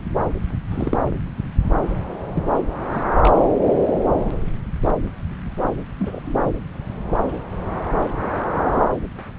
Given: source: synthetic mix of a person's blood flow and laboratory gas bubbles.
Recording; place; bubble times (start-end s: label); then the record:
Doppler ultrasound of blood flow; subclavian vein
0.70-0.97 s: bubbles
2.35-2.43 s: bubbles
2.94-3.03 s: bubbles
3.22-3.30 s: bubbles
5.99-6.34 s: bubbles
From the record:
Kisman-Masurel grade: 122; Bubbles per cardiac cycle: 1 to 2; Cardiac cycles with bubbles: 10 to 50%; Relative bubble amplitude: moderate (0.250 to 0.450); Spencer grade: 2 (many but less than half of the cardiac periods contain bubble signals, singularly or in groups); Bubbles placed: anywhere in the cardiac cycle